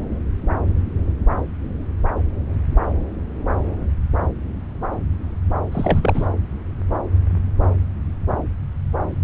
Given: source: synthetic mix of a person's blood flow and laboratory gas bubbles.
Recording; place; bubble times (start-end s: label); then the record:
Doppler ultrasound of blood flow; subclavian vein
5.71-6.27 s: bubbles
From the record:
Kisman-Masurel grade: 212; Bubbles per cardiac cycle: several, 3 to 8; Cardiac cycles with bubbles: 1 to 10%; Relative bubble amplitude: moderate (0.250 to 0.450); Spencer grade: 1 (occasional bubble signal discernible with the cardiac motion signal, with majority of cardiac periods free of bubbles); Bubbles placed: anywhere in the cardiac cycle